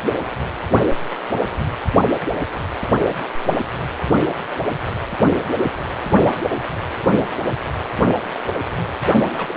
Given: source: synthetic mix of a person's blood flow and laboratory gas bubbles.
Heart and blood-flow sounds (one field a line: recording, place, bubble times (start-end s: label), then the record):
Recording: Doppler ultrasound of blood flow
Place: precordium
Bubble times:
9.27-9.57 s: bubbles
From the record:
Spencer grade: 2 (many but less than half of the cardiac periods contain bubble signals, singularly or in groups)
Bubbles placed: only in the low amplitude regions of the cardiac cycle